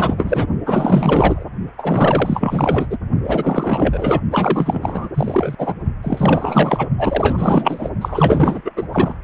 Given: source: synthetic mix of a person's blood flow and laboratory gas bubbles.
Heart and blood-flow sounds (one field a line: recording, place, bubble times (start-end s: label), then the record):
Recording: Doppler ultrasound of blood flow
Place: precordium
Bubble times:
0.00-0.47 s: bubbles
0.66-1.45 s: bubbles
1.78-2.86 s: bubbles
2.90-2.97 s: bubbles
3.24-4.21 s: bubbles
4.31-5.10 s: bubbles
5.14-5.55 s: bubbles
5.58-5.74 s: bubbles
6.03-6.89 s: bubbles
6.98-7.90 s: bubbles
8.01-8.61 s: bubbles
8.64-8.72 s: bubbles
8.76-8.88 s: bubbles
8.92-9.14 s: bubbles
From the record:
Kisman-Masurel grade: 444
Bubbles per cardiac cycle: continuous sound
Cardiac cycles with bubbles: 100%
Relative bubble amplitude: maximal (0.775 to 0.999)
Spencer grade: 4 (maximum detectable bubble signal sounding continuously throughout systole and diastole of every cardiac period, and overriding the amplitude of the normal cardiac signals)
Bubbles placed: only in the low amplitude regions of the cardiac cycle